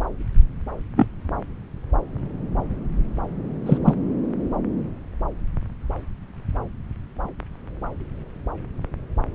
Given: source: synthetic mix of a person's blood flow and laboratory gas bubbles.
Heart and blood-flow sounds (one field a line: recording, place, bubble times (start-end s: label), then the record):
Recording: Doppler ultrasound of blood flow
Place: subclavian vein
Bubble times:
0.96-1.06 s: bubbles
3.65-3.78 s: bubbles
3.85-3.95 s: bubbles
From the record:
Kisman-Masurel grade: 123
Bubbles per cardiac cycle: 1 to 2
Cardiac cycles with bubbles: 10 to 50%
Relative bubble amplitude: loud (0.450 to 0.775)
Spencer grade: 2 (many but less than half of the cardiac periods contain bubble signals, singularly or in groups)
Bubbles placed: anywhere in the cardiac cycle